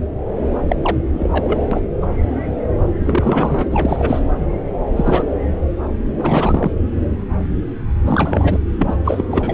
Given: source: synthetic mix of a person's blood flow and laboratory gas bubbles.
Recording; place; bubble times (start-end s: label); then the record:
Doppler ultrasound of blood flow; subclavian vein
0.68-0.76 s: bubbles
0.83-0.96 s: bubbles
1.14-1.28 s: bubbles
1.32-1.66 s: bubbles
1.71-1.81 s: bubbles
2.02-2.08 s: bubbles
3.00-3.64 s: bubbles
3.71-4.22 s: bubbles
4.95-5.23 s: bubbles
6.21-6.71 s: bubbles
8.06-8.57 s: bubbles
8.78-8.96 s: bubbles
9.04-9.25 s: bubbles
9.31-9.54 s: bubbles
From the record:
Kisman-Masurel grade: 232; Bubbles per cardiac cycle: several, 3 to 8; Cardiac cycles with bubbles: 50 to 99%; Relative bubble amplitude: moderate (0.250 to 0.450); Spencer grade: 3 (all of the cardiac periods contain showers or single bubble signals, but not dominating or overriding the cardiac motion signals); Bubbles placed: anywhere in the cardiac cycle